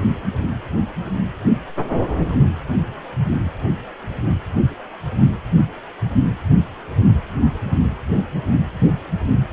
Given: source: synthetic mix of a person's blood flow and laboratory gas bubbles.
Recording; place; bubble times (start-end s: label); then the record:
Doppler ultrasound of blood flow; precordium
no bubbles
From the record:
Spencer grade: 0 (complete lack of bubble signals)